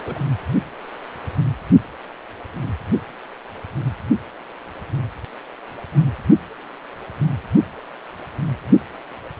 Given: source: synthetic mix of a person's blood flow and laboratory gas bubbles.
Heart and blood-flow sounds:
Doppler ultrasound of blood flow; precordium
0.04-0.18 s: bubbles
From the record:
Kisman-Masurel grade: 111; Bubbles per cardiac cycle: 1 to 2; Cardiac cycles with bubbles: 1 to 10%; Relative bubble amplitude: barely perceptible (0.100 to 0.250); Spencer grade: 1 (occasional bubble signal discernible with the cardiac motion signal, with majority of cardiac periods free of bubbles); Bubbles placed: only in the low amplitude regions of the cardiac cycle

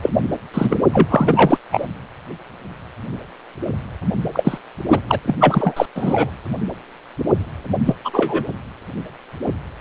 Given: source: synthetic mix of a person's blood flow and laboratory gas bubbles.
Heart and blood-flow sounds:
Doppler ultrasound of blood flow; precordium
0.02-0.10 s: bubbles
0.54-0.80 s: bubbles
0.92-1.58 s: bubbles
1.71-1.87 s: bubbles
4.33-4.58 s: bubbles
4.89-5.00 s: bubbles
5.07-5.20 s: bubbles
5.27-5.35 s: bubbles
5.41-5.86 s: bubbles
5.95-6.30 s: bubbles
7.85-7.96 s: bubbles
8.04-8.11 s: bubbles
8.13-8.44 s: bubbles
From the record:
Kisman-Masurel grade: 233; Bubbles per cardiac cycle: several, 3 to 8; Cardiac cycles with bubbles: 50 to 99%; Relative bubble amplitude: loud (0.450 to 0.775); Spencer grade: 3 (all of the cardiac periods contain showers or single bubble signals, but not dominating or overriding the cardiac motion signals); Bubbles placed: anywhere in the cardiac cycle

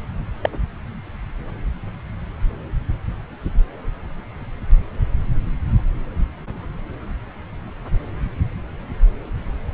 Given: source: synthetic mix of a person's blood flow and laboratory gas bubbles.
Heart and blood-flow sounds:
Doppler ultrasound of blood flow; subclavian vein
0.42-0.49 s: bubbles
From the record:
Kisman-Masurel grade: 113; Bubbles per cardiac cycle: 1 to 2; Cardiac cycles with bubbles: 1 to 10%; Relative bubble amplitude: loud (0.450 to 0.775); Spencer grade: 1 (occasional bubble signal discernible with the cardiac motion signal, with majority of cardiac periods free of bubbles); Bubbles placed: anywhere in the cardiac cycle

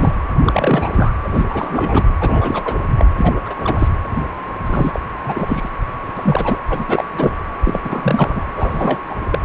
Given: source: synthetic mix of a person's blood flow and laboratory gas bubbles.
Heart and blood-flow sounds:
Doppler ultrasound of blood flow; precordium
0.00-0.15 s: bubbles
0.40-1.12 s: bubbles
1.24-1.29 s: bubbles
1.33-1.44 s: bubbles
1.50-2.04 s: bubbles
2.20-2.79 s: bubbles
2.94-3.07 s: bubbles
3.17-3.33 s: bubbles
3.45-3.54 s: bubbles
3.56-3.89 s: bubbles
4.66-5.00 s: bubbles
5.25-5.69 s: bubbles
6.17-6.58 s: bubbles
6.70-7.04 s: bubbles
7.12-7.32 s: bubbles
7.64-7.81 s: bubbles
7.84-8.41 s: bubbles
8.56-9.00 s: bubbles
9.06-9.16 s: bubbles
9.30-9.39 s: bubbles
From the record:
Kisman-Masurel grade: 343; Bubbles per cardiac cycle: rolling drumbeat, 9 or more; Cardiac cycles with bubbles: 100%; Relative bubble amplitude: loud (0.450 to 0.775); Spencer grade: 3 (all of the cardiac periods contain showers or single bubble signals, but not dominating or overriding the cardiac motion signals); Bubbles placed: anywhere in the cardiac cycle

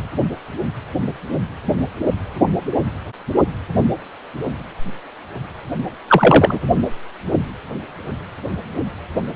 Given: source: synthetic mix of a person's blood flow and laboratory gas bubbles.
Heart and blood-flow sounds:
Doppler ultrasound of blood flow; precordium
6.08-6.65 s: bubbles
From the record:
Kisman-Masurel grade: 123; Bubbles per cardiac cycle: 1 to 2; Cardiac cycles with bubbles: 10 to 50%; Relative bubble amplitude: loud (0.450 to 0.775); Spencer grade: 2 (many but less than half of the cardiac periods contain bubble signals, singularly or in groups); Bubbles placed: only in the low amplitude regions of the cardiac cycle

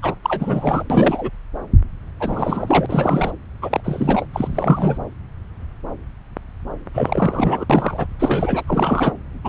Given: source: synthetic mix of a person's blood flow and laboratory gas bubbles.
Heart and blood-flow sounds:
Doppler ultrasound of blood flow; subclavian vein
0.02-0.15 s: bubbles
0.23-0.83 s: bubbles
0.90-1.30 s: bubbles
2.19-3.31 s: bubbles
3.62-3.81 s: bubbles
3.84-4.26 s: bubbles
4.33-4.98 s: bubbles
6.94-7.65 s: bubbles
7.70-8.07 s: bubbles
8.19-8.63 s: bubbles
8.67-9.12 s: bubbles
9.44-9.49 s: bubbles
From the record:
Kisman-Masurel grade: 332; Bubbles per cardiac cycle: rolling drumbeat, 9 or more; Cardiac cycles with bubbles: 50 to 99%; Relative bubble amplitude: moderate (0.250 to 0.450); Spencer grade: 3 (all of the cardiac periods contain showers or single bubble signals, but not dominating or overriding the cardiac motion signals); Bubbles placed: anywhere in the cardiac cycle

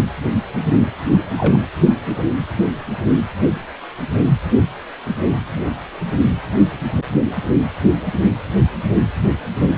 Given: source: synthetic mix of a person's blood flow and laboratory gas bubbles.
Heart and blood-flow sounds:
Doppler ultrasound of blood flow; precordium
1.38-1.57 s: bubbles
From the record:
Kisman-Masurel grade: 122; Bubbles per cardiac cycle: 1 to 2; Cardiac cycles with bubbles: 10 to 50%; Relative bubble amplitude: moderate (0.250 to 0.450); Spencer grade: 2 (many but less than half of the cardiac periods contain bubble signals, singularly or in groups); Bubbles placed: anywhere in the cardiac cycle

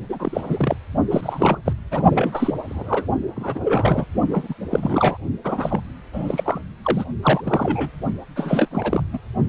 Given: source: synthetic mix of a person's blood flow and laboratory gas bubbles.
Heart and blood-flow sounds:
Doppler ultrasound of blood flow; precordium
0.09-0.76 s: bubbles
1.10-1.58 s: bubbles
1.66-1.73 s: bubbles
1.91-2.02 s: bubbles
2.11-2.54 s: bubbles
2.65-3.08 s: bubbles
3.36-3.60 s: bubbles
3.64-4.05 s: bubbles
4.29-4.54 s: bubbles
4.71-5.17 s: bubbles
5.44-5.80 s: bubbles
6.13-6.61 s: bubbles
6.84-7.04 s: bubbles
7.23-7.42 s: bubbles
7.45-7.91 s: bubbles
8.35-8.68 s: bubbles
8.71-9.02 s: bubbles
9.12-9.18 s: bubbles
From the record:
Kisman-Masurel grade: 342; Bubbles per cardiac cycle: rolling drumbeat, 9 or more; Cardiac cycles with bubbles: 100%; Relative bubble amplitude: moderate (0.250 to 0.450); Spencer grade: 3 (all of the cardiac periods contain showers or single bubble signals, but not dominating or overriding the cardiac motion signals); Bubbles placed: only in the low amplitude regions of the cardiac cycle

